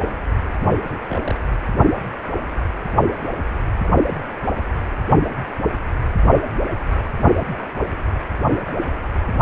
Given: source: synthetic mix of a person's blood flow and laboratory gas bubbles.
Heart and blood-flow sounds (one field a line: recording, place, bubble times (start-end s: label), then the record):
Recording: Doppler ultrasound of blood flow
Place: precordium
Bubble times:
0.84-0.97 s: bubbles
1.09-1.35 s: bubbles
From the record:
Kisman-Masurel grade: 221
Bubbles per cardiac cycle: several, 3 to 8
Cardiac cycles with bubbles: 10 to 50%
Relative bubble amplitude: barely perceptible (0.100 to 0.250)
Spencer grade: 2 (many but less than half of the cardiac periods contain bubble signals, singularly or in groups)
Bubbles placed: anywhere in the cardiac cycle